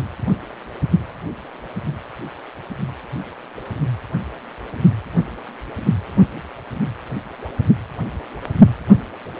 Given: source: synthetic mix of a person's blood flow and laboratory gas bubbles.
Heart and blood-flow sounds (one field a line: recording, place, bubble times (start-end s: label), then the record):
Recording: Doppler ultrasound of blood flow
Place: precordium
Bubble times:
no bubbles
From the record:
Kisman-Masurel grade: 000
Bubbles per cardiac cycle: 0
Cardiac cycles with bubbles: 0%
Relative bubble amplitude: no bubbles discernible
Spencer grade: 0 (complete lack of bubble signals)